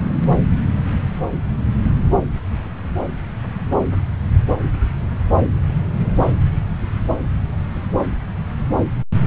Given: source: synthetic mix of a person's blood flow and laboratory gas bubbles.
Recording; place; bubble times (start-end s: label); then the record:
Doppler ultrasound of blood flow; subclavian vein
no bubbles
From the record:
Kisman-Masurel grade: 000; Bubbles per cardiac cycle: 0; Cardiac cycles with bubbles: 0%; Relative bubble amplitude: no bubbles discernible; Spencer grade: 0 (complete lack of bubble signals)